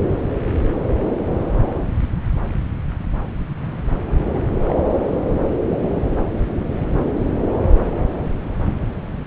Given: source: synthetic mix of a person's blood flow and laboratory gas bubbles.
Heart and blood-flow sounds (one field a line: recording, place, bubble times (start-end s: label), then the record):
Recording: Doppler ultrasound of blood flow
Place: subclavian vein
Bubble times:
4.31-4.46 s: bubbles
4.65-4.75 s: bubbles
From the record:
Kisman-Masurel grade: 211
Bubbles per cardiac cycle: several, 3 to 8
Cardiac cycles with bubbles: 1 to 10%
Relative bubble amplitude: barely perceptible (0.100 to 0.250)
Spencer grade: 1 (occasional bubble signal discernible with the cardiac motion signal, with majority of cardiac periods free of bubbles)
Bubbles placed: anywhere in the cardiac cycle